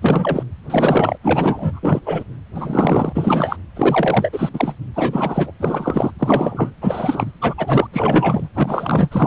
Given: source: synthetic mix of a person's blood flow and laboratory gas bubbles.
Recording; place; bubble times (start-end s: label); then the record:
Doppler ultrasound of blood flow; precordium
0.02-0.43 s: bubbles
0.70-1.18 s: bubbles
1.23-1.80 s: bubbles
1.83-2.00 s: bubbles
2.05-2.24 s: bubbles
2.55-3.12 s: bubbles
3.15-3.56 s: bubbles
3.76-4.29 s: bubbles
4.33-4.50 s: bubbles
4.54-4.73 s: bubbles
4.93-5.51 s: bubbles
5.59-6.12 s: bubbles
6.18-6.72 s: bubbles
6.81-7.32 s: bubbles
7.41-7.54 s: bubbles
7.57-7.87 s: bubbles
7.93-8.48 s: bubbles
8.54-9.27 s: bubbles
From the record:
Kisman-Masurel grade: 343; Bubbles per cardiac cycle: rolling drumbeat, 9 or more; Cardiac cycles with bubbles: 100%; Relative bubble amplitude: loud (0.450 to 0.775); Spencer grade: 3 (all of the cardiac periods contain showers or single bubble signals, but not dominating or overriding the cardiac motion signals); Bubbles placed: anywhere in the cardiac cycle